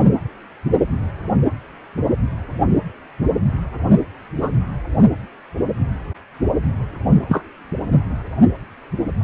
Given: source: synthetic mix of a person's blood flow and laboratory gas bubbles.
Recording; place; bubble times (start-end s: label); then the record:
Doppler ultrasound of blood flow; precordium
4.35-4.50 s: bubbles
7.29-7.44 s: bubbles
From the record:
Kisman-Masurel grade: 113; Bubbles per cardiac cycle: 1 to 2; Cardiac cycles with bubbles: 1 to 10%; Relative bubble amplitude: loud (0.450 to 0.775); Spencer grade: 1 (occasional bubble signal discernible with the cardiac motion signal, with majority of cardiac periods free of bubbles); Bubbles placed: anywhere in the cardiac cycle